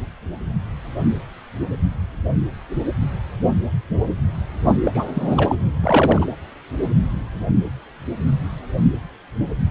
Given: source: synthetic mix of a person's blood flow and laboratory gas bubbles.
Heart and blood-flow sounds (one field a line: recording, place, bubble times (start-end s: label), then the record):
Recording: Doppler ultrasound of blood flow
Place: precordium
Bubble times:
4.84-5.06 s: bubbles
5.14-5.55 s: bubbles
5.83-6.25 s: bubbles
From the record:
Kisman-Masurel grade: 222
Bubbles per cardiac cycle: several, 3 to 8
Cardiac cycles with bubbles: 10 to 50%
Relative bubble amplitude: moderate (0.250 to 0.450)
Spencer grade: 2 (many but less than half of the cardiac periods contain bubble signals, singularly or in groups)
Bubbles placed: anywhere in the cardiac cycle